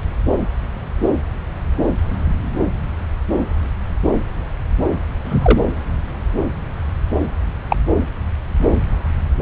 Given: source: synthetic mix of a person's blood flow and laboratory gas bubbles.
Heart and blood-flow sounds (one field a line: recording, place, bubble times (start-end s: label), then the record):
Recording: Doppler ultrasound of blood flow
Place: subclavian vein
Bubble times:
5.24-5.62 s: bubbles
7.70-7.76 s: bubbles
From the record:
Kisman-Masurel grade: 123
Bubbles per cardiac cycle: 1 to 2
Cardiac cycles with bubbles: 10 to 50%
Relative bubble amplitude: loud (0.450 to 0.775)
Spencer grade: 2 (many but less than half of the cardiac periods contain bubble signals, singularly or in groups)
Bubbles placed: anywhere in the cardiac cycle